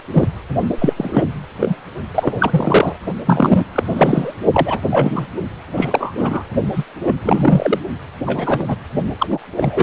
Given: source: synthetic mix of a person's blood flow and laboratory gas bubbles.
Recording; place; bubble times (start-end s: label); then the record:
Doppler ultrasound of blood flow; precordium
0.13-0.28 s: bubbles
0.78-0.93 s: bubbles
0.96-1.26 s: bubbles
1.54-1.76 s: bubbles
2.15-2.97 s: bubbles
3.26-3.65 s: bubbles
3.73-4.35 s: bubbles
4.53-4.80 s: bubbles
4.90-5.27 s: bubbles
5.76-6.12 s: bubbles
6.16-6.44 s: bubbles
6.71-6.84 s: bubbles
7.07-7.13 s: bubbles
7.25-7.79 s: bubbles
8.26-8.65 s: bubbles
8.67-8.76 s: bubbles
9.19-9.27 s: bubbles
9.30-9.39 s: bubbles
9.57-9.83 s: bubbles
From the record:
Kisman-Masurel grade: 243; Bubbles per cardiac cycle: several, 3 to 8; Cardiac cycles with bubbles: 100%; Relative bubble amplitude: loud (0.450 to 0.775); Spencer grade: 3 (all of the cardiac periods contain showers or single bubble signals, but not dominating or overriding the cardiac motion signals); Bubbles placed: only in the low amplitude regions of the cardiac cycle